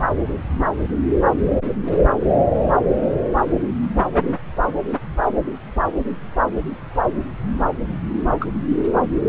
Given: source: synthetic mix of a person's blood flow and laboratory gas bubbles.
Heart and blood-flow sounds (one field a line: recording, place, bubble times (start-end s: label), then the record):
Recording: Doppler ultrasound of blood flow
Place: subclavian vein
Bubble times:
8.39-8.48 s: bubbles
8.77-8.83 s: bubbles
From the record:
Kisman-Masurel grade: 112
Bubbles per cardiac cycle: 1 to 2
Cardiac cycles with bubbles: 1 to 10%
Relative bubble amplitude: moderate (0.250 to 0.450)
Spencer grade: 1 (occasional bubble signal discernible with the cardiac motion signal, with majority of cardiac periods free of bubbles)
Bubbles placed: anywhere in the cardiac cycle